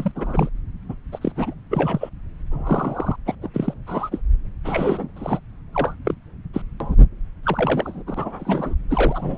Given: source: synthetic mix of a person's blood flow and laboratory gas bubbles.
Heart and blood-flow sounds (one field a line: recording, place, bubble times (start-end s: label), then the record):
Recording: Doppler ultrasound of blood flow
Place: subclavian vein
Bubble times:
0.00-0.11 s: bubbles
0.16-0.49 s: bubbles
0.89-0.94 s: bubbles
1.12-1.32 s: bubbles
1.36-1.54 s: bubbles
1.70-2.09 s: bubbles
2.51-3.16 s: bubbles
3.26-3.35 s: bubbles
3.42-3.49 s: bubbles
3.54-3.74 s: bubbles
3.87-4.21 s: bubbles
4.65-5.08 s: bubbles
5.16-5.40 s: bubbles
5.74-5.95 s: bubbles
6.05-6.15 s: bubbles
6.54-6.62 s: bubbles
6.80-6.95 s: bubbles
7.43-8.03 s: bubbles
8.06-8.75 s: bubbles
8.89-9.38 s: bubbles
From the record:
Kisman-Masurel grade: 242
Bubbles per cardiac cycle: several, 3 to 8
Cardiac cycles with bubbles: 100%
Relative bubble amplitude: moderate (0.250 to 0.450)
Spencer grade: 3 (all of the cardiac periods contain showers or single bubble signals, but not dominating or overriding the cardiac motion signals)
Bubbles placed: anywhere in the cardiac cycle